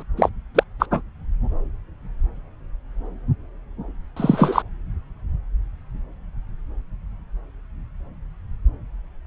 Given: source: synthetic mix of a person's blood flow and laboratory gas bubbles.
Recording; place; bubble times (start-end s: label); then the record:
Doppler ultrasound of blood flow; subclavian vein
0.00-0.02 s: bubbles
0.16-0.29 s: bubbles
0.54-0.64 s: bubbles
0.79-0.85 s: bubbles
0.91-1.02 s: bubbles
4.16-4.62 s: bubbles
From the record:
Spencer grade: 2 (many but less than half of the cardiac periods contain bubble signals, singularly or in groups); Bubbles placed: anywhere in the cardiac cycle